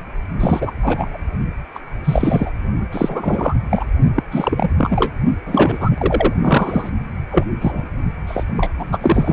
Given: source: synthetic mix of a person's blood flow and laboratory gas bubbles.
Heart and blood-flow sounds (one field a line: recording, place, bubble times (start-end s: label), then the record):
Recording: Doppler ultrasound of blood flow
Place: precordium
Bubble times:
0.40-0.72 s: bubbles
0.83-1.17 s: bubbles
1.75-1.79 s: bubbles
2.04-2.50 s: bubbles
2.92-3.54 s: bubbles
3.69-3.85 s: bubbles
4.16-4.23 s: bubbles
4.31-4.69 s: bubbles
4.78-5.12 s: bubbles
5.46-6.33 s: bubbles
6.40-6.90 s: bubbles
7.31-7.44 s: bubbles
7.61-7.83 s: bubbles
8.27-8.44 s: bubbles
8.56-8.71 s: bubbles
8.78-9.33 s: bubbles
From the record:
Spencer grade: 3 (all of the cardiac periods contain showers or single bubble signals, but not dominating or overriding the cardiac motion signals)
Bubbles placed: only in the low amplitude regions of the cardiac cycle